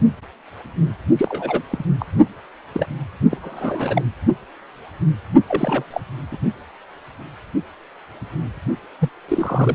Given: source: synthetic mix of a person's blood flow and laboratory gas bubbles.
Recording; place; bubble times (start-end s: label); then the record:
Doppler ultrasound of blood flow; precordium
1.17-1.62 s: bubbles
1.70-1.85 s: bubbles
1.99-2.06 s: bubbles
2.73-2.87 s: bubbles
3.31-3.38 s: bubbles
3.42-4.02 s: bubbles
5.48-5.83 s: bubbles
5.90-6.00 s: bubbles
6.31-6.37 s: bubbles
8.99-9.09 s: bubbles
9.28-9.75 s: bubbles
From the record:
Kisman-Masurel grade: 222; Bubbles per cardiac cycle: several, 3 to 8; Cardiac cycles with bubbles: 10 to 50%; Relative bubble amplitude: moderate (0.250 to 0.450); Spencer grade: 2 (many but less than half of the cardiac periods contain bubble signals, singularly or in groups); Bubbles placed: only in the low amplitude regions of the cardiac cycle